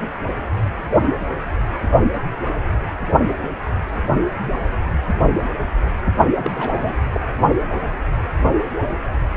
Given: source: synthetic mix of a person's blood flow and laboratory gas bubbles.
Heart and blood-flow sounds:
Doppler ultrasound of blood flow; precordium
6.43-6.96 s: bubbles
7.12-7.20 s: bubbles
From the record:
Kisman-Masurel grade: 211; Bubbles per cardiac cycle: several, 3 to 8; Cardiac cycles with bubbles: 1 to 10%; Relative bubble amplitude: barely perceptible (0.100 to 0.250); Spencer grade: 1 (occasional bubble signal discernible with the cardiac motion signal, with majority of cardiac periods free of bubbles); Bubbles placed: only in the low amplitude regions of the cardiac cycle

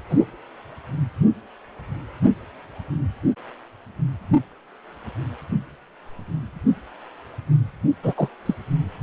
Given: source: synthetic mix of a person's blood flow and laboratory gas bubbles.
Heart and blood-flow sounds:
Doppler ultrasound of blood flow; precordium
0.09-0.26 s: bubbles
8.02-8.14 s: bubbles
8.16-8.29 s: bubbles
8.46-8.54 s: bubbles
From the record:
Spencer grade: 2 (many but less than half of the cardiac periods contain bubble signals, singularly or in groups); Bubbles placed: only in the low amplitude regions of the cardiac cycle

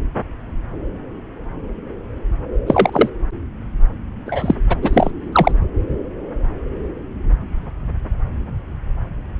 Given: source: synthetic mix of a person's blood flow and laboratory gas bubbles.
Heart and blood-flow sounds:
Doppler ultrasound of blood flow; subclavian vein
2.67-3.09 s: bubbles
4.26-4.55 s: bubbles
4.69-4.76 s: bubbles
4.82-5.11 s: bubbles
5.32-5.52 s: bubbles
From the record:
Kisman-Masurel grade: 223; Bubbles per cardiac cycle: several, 3 to 8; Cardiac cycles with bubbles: 10 to 50%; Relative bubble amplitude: loud (0.450 to 0.775); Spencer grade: 2 (many but less than half of the cardiac periods contain bubble signals, singularly or in groups); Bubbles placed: anywhere in the cardiac cycle

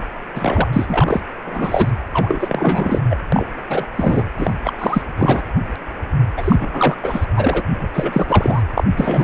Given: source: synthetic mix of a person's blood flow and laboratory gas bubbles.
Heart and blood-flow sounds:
Doppler ultrasound of blood flow; precordium
0.35-0.68 s: bubbles
0.72-0.85 s: bubbles
0.88-1.22 s: bubbles
1.45-1.91 s: bubbles
2.13-3.00 s: bubbles
3.10-3.17 s: bubbles
3.32-3.47 s: bubbles
3.70-3.87 s: bubbles
3.96-4.27 s: bubbles
4.38-4.54 s: bubbles
4.61-4.73 s: bubbles
4.78-5.02 s: bubbles
5.17-5.42 s: bubbles
6.37-6.56 s: bubbles
6.59-6.97 s: bubbles
7.03-7.26 s: bubbles
7.36-7.60 s: bubbles
7.80-7.88 s: bubbles
7.94-8.62 s: bubbles
8.78-8.83 s: bubbles
8.96-9.24 s: bubbles
From the record:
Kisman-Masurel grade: 343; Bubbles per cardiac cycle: rolling drumbeat, 9 or more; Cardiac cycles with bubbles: 100%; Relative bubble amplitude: loud (0.450 to 0.775); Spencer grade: 3 (all of the cardiac periods contain showers or single bubble signals, but not dominating or overriding the cardiac motion signals); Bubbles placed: anywhere in the cardiac cycle

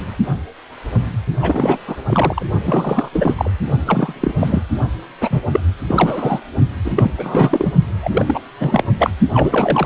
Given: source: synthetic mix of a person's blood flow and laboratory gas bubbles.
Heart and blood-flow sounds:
Doppler ultrasound of blood flow; precordium
1.42-1.78 s: bubbles
1.88-1.96 s: bubbles
2.08-2.44 s: bubbles
2.65-3.10 s: bubbles
3.12-3.34 s: bubbles
3.37-3.50 s: bubbles
3.86-4.13 s: bubbles
4.20-4.34 s: bubbles
4.38-4.62 s: bubbles
5.21-5.43 s: bubbles
5.52-5.60 s: bubbles
5.88-6.40 s: bubbles
6.84-7.11 s: bubbles
7.16-7.72 s: bubbles
8.03-8.39 s: bubbles
8.60-8.84 s: bubbles
8.99-9.10 s: bubbles
9.34-9.86 s: bubbles
From the record:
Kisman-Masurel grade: 333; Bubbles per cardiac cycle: rolling drumbeat, 9 or more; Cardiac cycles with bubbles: 50 to 99%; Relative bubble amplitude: loud (0.450 to 0.775); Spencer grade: 3 (all of the cardiac periods contain showers or single bubble signals, but not dominating or overriding the cardiac motion signals); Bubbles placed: only in the low amplitude regions of the cardiac cycle

